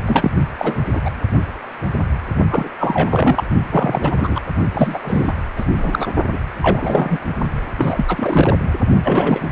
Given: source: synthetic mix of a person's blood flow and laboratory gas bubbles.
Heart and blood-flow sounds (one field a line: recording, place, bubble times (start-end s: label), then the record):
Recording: Doppler ultrasound of blood flow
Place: precordium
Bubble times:
0.05-0.32 s: bubbles
0.57-0.80 s: bubbles
0.95-1.01 s: bubbles
1.05-1.10 s: bubbles
2.49-2.69 s: bubbles
2.79-3.44 s: bubbles
3.71-4.40 s: bubbles
4.73-4.99 s: bubbles
5.02-5.33 s: bubbles
5.56-5.65 s: bubbles
5.78-6.06 s: bubbles
6.32-6.38 s: bubbles
6.61-7.18 s: bubbles
7.77-8.58 s: bubbles
9.04-9.50 s: bubbles
From the record:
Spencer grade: 3 (all of the cardiac periods contain showers or single bubble signals, but not dominating or overriding the cardiac motion signals)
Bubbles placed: only in the low amplitude regions of the cardiac cycle